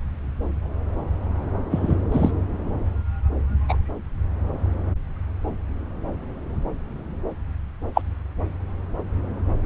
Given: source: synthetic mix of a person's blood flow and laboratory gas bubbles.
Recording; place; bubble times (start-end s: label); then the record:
Doppler ultrasound of blood flow; subclavian vein
1.71-1.96 s: bubbles
2.12-2.31 s: bubbles
3.68-3.77 s: bubbles
7.94-8.02 s: bubbles
From the record:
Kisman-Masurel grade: 123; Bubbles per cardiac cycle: 1 to 2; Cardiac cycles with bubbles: 10 to 50%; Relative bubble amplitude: loud (0.450 to 0.775); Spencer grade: 2 (many but less than half of the cardiac periods contain bubble signals, singularly or in groups); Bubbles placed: anywhere in the cardiac cycle